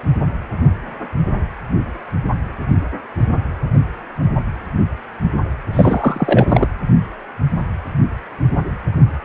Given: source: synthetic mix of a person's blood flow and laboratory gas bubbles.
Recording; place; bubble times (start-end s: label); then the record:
Doppler ultrasound of blood flow; precordium
5.72-6.68 s: bubbles
From the record:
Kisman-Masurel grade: 213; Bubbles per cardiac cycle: several, 3 to 8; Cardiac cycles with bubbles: 1 to 10%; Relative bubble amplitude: loud (0.450 to 0.775); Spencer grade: 1 (occasional bubble signal discernible with the cardiac motion signal, with majority of cardiac periods free of bubbles); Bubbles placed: anywhere in the cardiac cycle